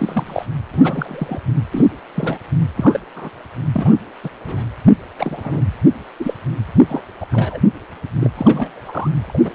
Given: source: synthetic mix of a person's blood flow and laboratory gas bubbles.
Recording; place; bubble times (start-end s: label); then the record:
Doppler ultrasound of blood flow; precordium
0.00-0.46 s: bubbles
0.72-1.41 s: bubbles
1.73-1.88 s: bubbles
2.15-2.38 s: bubbles
2.76-3.00 s: bubbles
3.16-3.30 s: bubbles
3.73-3.94 s: bubbles
4.23-4.29 s: bubbles
4.45-4.64 s: bubbles
5.18-5.66 s: bubbles
6.20-6.34 s: bubbles
6.75-6.81 s: bubbles
6.88-7.01 s: bubbles
7.20-7.26 s: bubbles
7.31-7.61 s: bubbles
8.13-8.29 s: bubbles
8.37-8.81 s: bubbles
8.85-9.55 s: bubbles
From the record:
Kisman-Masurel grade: 242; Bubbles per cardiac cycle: several, 3 to 8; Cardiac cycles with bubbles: 100%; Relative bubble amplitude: moderate (0.250 to 0.450); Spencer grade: 3 (all of the cardiac periods contain showers or single bubble signals, but not dominating or overriding the cardiac motion signals); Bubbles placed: anywhere in the cardiac cycle